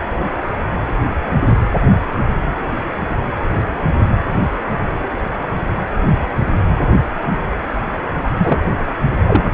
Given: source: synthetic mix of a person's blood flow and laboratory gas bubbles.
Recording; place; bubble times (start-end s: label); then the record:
Doppler ultrasound of blood flow; precordium
8.35-8.58 s: bubbles
9.27-9.43 s: bubbles
From the record:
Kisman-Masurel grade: 213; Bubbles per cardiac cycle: several, 3 to 8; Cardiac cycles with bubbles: 1 to 10%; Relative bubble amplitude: loud (0.450 to 0.775); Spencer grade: 1 (occasional bubble signal discernible with the cardiac motion signal, with majority of cardiac periods free of bubbles); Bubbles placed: anywhere in the cardiac cycle